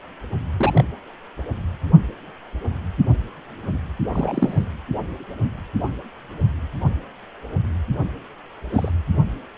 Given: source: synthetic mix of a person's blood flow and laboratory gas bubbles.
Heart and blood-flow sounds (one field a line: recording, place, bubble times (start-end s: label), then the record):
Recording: Doppler ultrasound of blood flow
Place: precordium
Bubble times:
0.59-0.84 s: bubbles
4.13-4.63 s: bubbles
8.71-8.90 s: bubbles
From the record:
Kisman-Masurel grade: 122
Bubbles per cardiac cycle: 1 to 2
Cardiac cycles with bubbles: 10 to 50%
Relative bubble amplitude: moderate (0.250 to 0.450)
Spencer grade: 2 (many but less than half of the cardiac periods contain bubble signals, singularly or in groups)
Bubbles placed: anywhere in the cardiac cycle